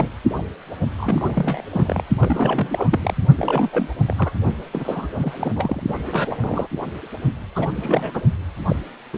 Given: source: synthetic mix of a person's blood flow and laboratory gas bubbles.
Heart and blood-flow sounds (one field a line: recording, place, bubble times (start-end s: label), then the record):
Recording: Doppler ultrasound of blood flow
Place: precordium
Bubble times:
0.00-0.09 s: bubbles
0.38-0.42 s: bubbles
0.97-1.62 s: bubbles
1.71-2.04 s: bubbles
2.19-3.14 s: bubbles
3.35-3.88 s: bubbles
4.08-4.32 s: bubbles
4.72-5.07 s: bubbles
5.18-5.51 s: bubbles
5.56-5.83 s: bubbles
5.88-6.36 s: bubbles
6.40-6.67 s: bubbles
7.55-7.72 s: bubbles
7.76-8.22 s: bubbles
8.68-8.76 s: bubbles
9.13-9.18 s: bubbles
From the record:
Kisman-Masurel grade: 342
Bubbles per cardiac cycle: rolling drumbeat, 9 or more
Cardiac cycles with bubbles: 100%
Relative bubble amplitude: moderate (0.250 to 0.450)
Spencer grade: 3 (all of the cardiac periods contain showers or single bubble signals, but not dominating or overriding the cardiac motion signals)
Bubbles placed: only in the low amplitude regions of the cardiac cycle